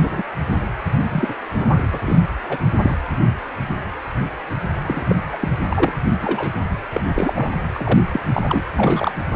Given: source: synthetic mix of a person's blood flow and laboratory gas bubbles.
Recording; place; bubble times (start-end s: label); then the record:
Doppler ultrasound of blood flow; precordium
0.02-0.23 s: bubbles
1.10-1.35 s: bubbles
1.58-1.87 s: bubbles
1.91-1.99 s: bubbles
2.04-2.20 s: bubbles
2.44-2.57 s: bubbles
2.81-2.95 s: bubbles
4.86-5.16 s: bubbles
5.33-5.37 s: bubbles
5.40-5.49 s: bubbles
5.70-5.95 s: bubbles
6.23-6.53 s: bubbles
6.92-7.00 s: bubbles
7.15-7.50 s: bubbles
7.74-8.00 s: bubbles
8.08-8.19 s: bubbles
8.33-8.62 s: bubbles
8.78-9.14 s: bubbles
From the record:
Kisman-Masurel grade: 232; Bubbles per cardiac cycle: several, 3 to 8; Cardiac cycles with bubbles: 50 to 99%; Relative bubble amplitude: moderate (0.250 to 0.450); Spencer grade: 3 (all of the cardiac periods contain showers or single bubble signals, but not dominating or overriding the cardiac motion signals); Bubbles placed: anywhere in the cardiac cycle